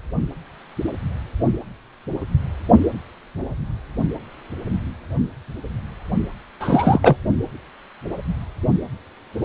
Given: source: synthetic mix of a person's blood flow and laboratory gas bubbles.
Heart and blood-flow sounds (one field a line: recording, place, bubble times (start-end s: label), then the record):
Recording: Doppler ultrasound of blood flow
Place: precordium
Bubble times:
6.60-7.17 s: bubbles
From the record:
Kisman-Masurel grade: 213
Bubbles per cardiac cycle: several, 3 to 8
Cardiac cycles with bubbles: 1 to 10%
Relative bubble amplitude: loud (0.450 to 0.775)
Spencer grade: 1 (occasional bubble signal discernible with the cardiac motion signal, with majority of cardiac periods free of bubbles)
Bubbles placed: only in the low amplitude regions of the cardiac cycle